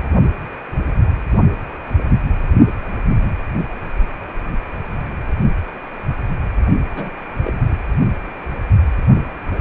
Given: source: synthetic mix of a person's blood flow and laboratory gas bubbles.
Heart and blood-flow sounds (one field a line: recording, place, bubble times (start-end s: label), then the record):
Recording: Doppler ultrasound of blood flow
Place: precordium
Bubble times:
6.96-7.10 s: bubbles
7.35-7.78 s: bubbles
9.56-9.61 s: bubbles
From the record:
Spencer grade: 2 (many but less than half of the cardiac periods contain bubble signals, singularly or in groups)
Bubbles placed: only in the low amplitude regions of the cardiac cycle